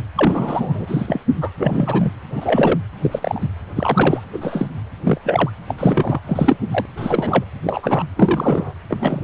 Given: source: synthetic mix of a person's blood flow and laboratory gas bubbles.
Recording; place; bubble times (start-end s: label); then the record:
Doppler ultrasound of blood flow; precordium
0.15-1.21 s: bubbles
1.41-1.50 s: bubbles
1.58-2.10 s: bubbles
2.31-2.79 s: bubbles
3.02-3.48 s: bubbles
3.76-4.23 s: bubbles
4.32-4.66 s: bubbles
5.04-5.19 s: bubbles
5.23-5.51 s: bubbles
5.68-5.74 s: bubbles
5.78-6.20 s: bubbles
6.26-6.56 s: bubbles
6.71-6.86 s: bubbles
6.96-7.44 s: bubbles
7.63-8.04 s: bubbles
8.16-8.74 s: bubbles
8.89-9.22 s: bubbles
From the record:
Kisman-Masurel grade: 233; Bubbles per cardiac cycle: several, 3 to 8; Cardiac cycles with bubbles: 50 to 99%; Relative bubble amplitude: loud (0.450 to 0.775); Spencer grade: 3 (all of the cardiac periods contain showers or single bubble signals, but not dominating or overriding the cardiac motion signals); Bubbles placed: anywhere in the cardiac cycle